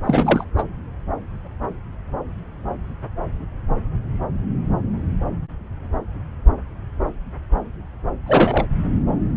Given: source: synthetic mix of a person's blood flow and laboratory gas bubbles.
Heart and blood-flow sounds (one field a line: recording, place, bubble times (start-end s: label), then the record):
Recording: Doppler ultrasound of blood flow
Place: subclavian vein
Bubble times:
0.04-0.44 s: bubbles
0.57-0.63 s: bubbles
8.26-8.66 s: bubbles
From the record:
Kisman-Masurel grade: 213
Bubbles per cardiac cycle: several, 3 to 8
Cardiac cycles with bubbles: 1 to 10%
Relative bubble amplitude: loud (0.450 to 0.775)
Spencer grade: 1 (occasional bubble signal discernible with the cardiac motion signal, with majority of cardiac periods free of bubbles)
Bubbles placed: anywhere in the cardiac cycle